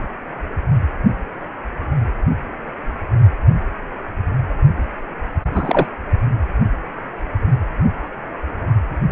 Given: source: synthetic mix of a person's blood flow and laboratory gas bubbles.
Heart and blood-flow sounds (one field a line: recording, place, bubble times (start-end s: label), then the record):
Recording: Doppler ultrasound of blood flow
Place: precordium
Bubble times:
5.53-5.86 s: bubbles
From the record:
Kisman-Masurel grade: 113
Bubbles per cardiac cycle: 1 to 2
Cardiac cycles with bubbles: 1 to 10%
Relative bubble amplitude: loud (0.450 to 0.775)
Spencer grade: 1 (occasional bubble signal discernible with the cardiac motion signal, with majority of cardiac periods free of bubbles)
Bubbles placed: only in the low amplitude regions of the cardiac cycle